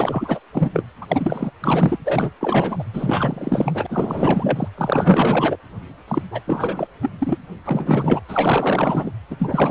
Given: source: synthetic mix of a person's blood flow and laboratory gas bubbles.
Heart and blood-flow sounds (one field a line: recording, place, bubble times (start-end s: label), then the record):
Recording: Doppler ultrasound of blood flow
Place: precordium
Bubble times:
0.00-0.40 s: bubbles
0.52-0.71 s: bubbles
0.73-0.84 s: bubbles
1.01-1.51 s: bubbles
1.60-1.96 s: bubbles
2.04-2.31 s: bubbles
2.41-2.83 s: bubbles
2.93-3.86 s: bubbles
3.89-4.68 s: bubbles
4.77-5.57 s: bubbles
6.07-6.22 s: bubbles
6.30-6.42 s: bubbles
6.46-6.87 s: bubbles
7.01-7.11 s: bubbles
7.18-7.38 s: bubbles
7.65-8.20 s: bubbles
8.28-9.11 s: bubbles
9.30-9.71 s: bubbles
From the record:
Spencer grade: 4 (maximum detectable bubble signal sounding continuously throughout systole and diastole of every cardiac period, and overriding the amplitude of the normal cardiac signals)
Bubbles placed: anywhere in the cardiac cycle